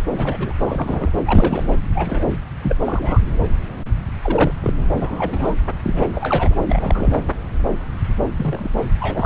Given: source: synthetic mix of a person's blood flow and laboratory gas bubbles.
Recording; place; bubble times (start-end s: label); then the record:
Doppler ultrasound of blood flow; subclavian vein
0.14-0.53 s: bubbles
0.60-1.10 s: bubbles
1.25-1.75 s: bubbles
1.86-2.38 s: bubbles
2.63-2.75 s: bubbles
2.78-3.20 s: bubbles
4.23-4.52 s: bubbles
4.62-4.73 s: bubbles
4.96-5.55 s: bubbles
5.83-6.10 s: bubbles
6.15-6.54 s: bubbles
6.67-7.16 s: bubbles
8.37-8.71 s: bubbles
9.00-9.26 s: bubbles
From the record:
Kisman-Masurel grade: 232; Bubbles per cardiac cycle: several, 3 to 8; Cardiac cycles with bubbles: 50 to 99%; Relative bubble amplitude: moderate (0.250 to 0.450); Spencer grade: 3 (all of the cardiac periods contain showers or single bubble signals, but not dominating or overriding the cardiac motion signals); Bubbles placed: anywhere in the cardiac cycle